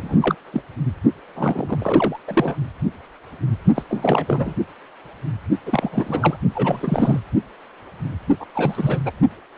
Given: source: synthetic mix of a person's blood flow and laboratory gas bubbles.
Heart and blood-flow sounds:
Doppler ultrasound of blood flow; precordium
0.00-0.35 s: bubbles
0.52-0.62 s: bubbles
1.35-1.77 s: bubbles
1.80-2.19 s: bubbles
2.27-2.56 s: bubbles
3.75-3.83 s: bubbles
3.89-4.55 s: bubbles
5.65-6.37 s: bubbles
6.55-7.19 s: bubbles
8.40-8.46 s: bubbles
8.54-8.99 s: bubbles
9.05-9.12 s: bubbles
From the record:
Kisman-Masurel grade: 332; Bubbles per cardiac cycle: rolling drumbeat, 9 or more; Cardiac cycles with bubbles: 50 to 99%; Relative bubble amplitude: moderate (0.250 to 0.450); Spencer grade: 3 (all of the cardiac periods contain showers or single bubble signals, but not dominating or overriding the cardiac motion signals); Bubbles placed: only in the low amplitude regions of the cardiac cycle

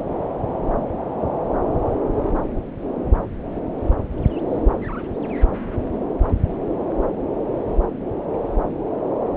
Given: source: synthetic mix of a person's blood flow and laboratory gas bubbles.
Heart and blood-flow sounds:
Doppler ultrasound of blood flow; subclavian vein
no bubbles
From the record:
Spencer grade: 0 (complete lack of bubble signals)

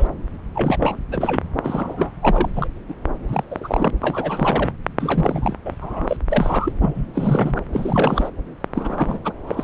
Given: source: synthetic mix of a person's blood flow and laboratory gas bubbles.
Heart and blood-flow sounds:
Doppler ultrasound of blood flow; subclavian vein
0.00-0.07 s: bubbles
0.55-0.76 s: bubbles
0.79-0.98 s: bubbles
1.11-1.42 s: bubbles
1.62-2.11 s: bubbles
2.21-2.67 s: bubbles
2.88-2.94 s: bubbles
3.27-3.44 s: bubbles
3.51-3.91 s: bubbles
4.01-4.74 s: bubbles
5.00-5.56 s: bubbles
5.65-5.75 s: bubbles
5.80-6.17 s: bubbles
6.29-6.72 s: bubbles
6.80-7.06 s: bubbles
7.13-7.61 s: bubbles
7.72-8.30 s: bubbles
8.75-9.20 s: bubbles
9.24-9.32 s: bubbles
9.47-9.63 s: bubbles
From the record:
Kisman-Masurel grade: 332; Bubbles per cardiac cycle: rolling drumbeat, 9 or more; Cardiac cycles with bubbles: 50 to 99%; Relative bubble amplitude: moderate (0.250 to 0.450); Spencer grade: 3 (all of the cardiac periods contain showers or single bubble signals, but not dominating or overriding the cardiac motion signals); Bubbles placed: anywhere in the cardiac cycle

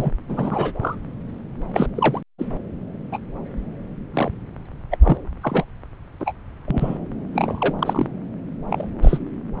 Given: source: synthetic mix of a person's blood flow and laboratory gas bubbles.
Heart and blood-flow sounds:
Doppler ultrasound of blood flow; subclavian vein
0.00-0.11 s: bubbles
0.28-0.72 s: bubbles
0.80-0.96 s: bubbles
1.74-1.88 s: bubbles
1.95-2.21 s: bubbles
2.38-2.45 s: bubbles
3.12-3.18 s: bubbles
4.14-4.32 s: bubbles
4.91-4.97 s: bubbles
5.03-5.17 s: bubbles
5.42-5.65 s: bubbles
6.20-6.33 s: bubbles
6.67-6.98 s: bubbles
7.33-7.74 s: bubbles
7.79-8.06 s: bubbles
8.69-8.87 s: bubbles
9.01-9.18 s: bubbles
From the record:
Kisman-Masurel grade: 232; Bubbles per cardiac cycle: several, 3 to 8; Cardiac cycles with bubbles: 50 to 99%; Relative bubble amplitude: moderate (0.250 to 0.450); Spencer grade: 3 (all of the cardiac periods contain showers or single bubble signals, but not dominating or overriding the cardiac motion signals); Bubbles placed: anywhere in the cardiac cycle

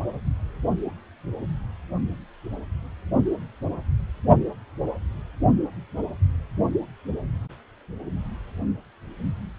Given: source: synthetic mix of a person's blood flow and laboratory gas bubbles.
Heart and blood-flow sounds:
Doppler ultrasound of blood flow; precordium
no bubbles
From the record:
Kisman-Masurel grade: 000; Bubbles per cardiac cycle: 0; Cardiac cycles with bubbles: 0%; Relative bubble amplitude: no bubbles discernible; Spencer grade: 0 (complete lack of bubble signals)

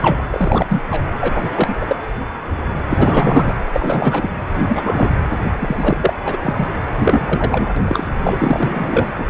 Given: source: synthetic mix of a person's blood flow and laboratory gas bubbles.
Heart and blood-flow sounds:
Doppler ultrasound of blood flow; precordium
0.00-0.24 s: bubbles
0.33-0.82 s: bubbles
0.90-1.02 s: bubbles
1.21-1.50 s: bubbles
1.56-1.77 s: bubbles
1.81-1.96 s: bubbles
2.90-3.54 s: bubbles
3.73-4.29 s: bubbles
4.49-5.10 s: bubbles
5.59-6.13 s: bubbles
6.24-6.37 s: bubbles
6.41-6.54 s: bubbles
6.56-6.69 s: bubbles
6.96-7.70 s: bubbles
7.76-7.82 s: bubbles
7.85-8.08 s: bubbles
8.24-8.38 s: bubbles
8.41-9.08 s: bubbles
9.18-9.26 s: bubbles
From the record:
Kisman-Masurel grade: 333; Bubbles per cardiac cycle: rolling drumbeat, 9 or more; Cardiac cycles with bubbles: 50 to 99%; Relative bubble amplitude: loud (0.450 to 0.775); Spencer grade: 3 (all of the cardiac periods contain showers or single bubble signals, but not dominating or overriding the cardiac motion signals); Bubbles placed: anywhere in the cardiac cycle

